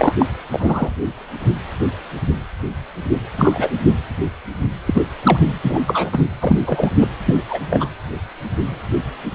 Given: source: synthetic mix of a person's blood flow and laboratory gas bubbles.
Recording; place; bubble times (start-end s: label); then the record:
Doppler ultrasound of blood flow; precordium
0.00-0.14 s: bubbles
0.19-0.26 s: bubbles
0.52-0.90 s: bubbles
3.38-3.69 s: bubbles
3.83-3.95 s: bubbles
4.87-5.04 s: bubbles
5.23-5.38 s: bubbles
5.62-6.25 s: bubbles
6.41-6.60 s: bubbles
6.65-6.90 s: bubbles
6.99-7.08 s: bubbles
7.26-7.35 s: bubbles
7.49-7.60 s: bubbles
7.70-7.89 s: bubbles
From the record:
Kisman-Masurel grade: 233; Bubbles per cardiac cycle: several, 3 to 8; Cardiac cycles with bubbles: 50 to 99%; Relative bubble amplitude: loud (0.450 to 0.775); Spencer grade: 3 (all of the cardiac periods contain showers or single bubble signals, but not dominating or overriding the cardiac motion signals); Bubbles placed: anywhere in the cardiac cycle